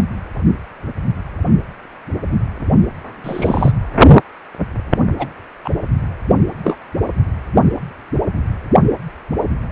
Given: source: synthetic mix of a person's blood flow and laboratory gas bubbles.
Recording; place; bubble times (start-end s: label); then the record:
Doppler ultrasound of blood flow; precordium
0.00-0.02 s: bubbles
3.24-3.72 s: bubbles
5.18-5.27 s: bubbles
5.64-5.70 s: bubbles
6.63-6.77 s: bubbles
From the record:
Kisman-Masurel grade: 123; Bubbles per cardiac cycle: 1 to 2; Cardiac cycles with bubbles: 10 to 50%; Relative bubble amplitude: loud (0.450 to 0.775); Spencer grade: 2 (many but less than half of the cardiac periods contain bubble signals, singularly or in groups); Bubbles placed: only in the low amplitude regions of the cardiac cycle